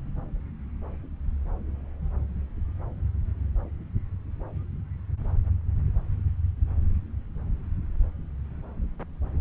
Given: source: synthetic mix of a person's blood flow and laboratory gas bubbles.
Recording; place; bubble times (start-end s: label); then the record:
Doppler ultrasound of blood flow; subclavian vein
no bubbles
From the record:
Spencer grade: 0 (complete lack of bubble signals)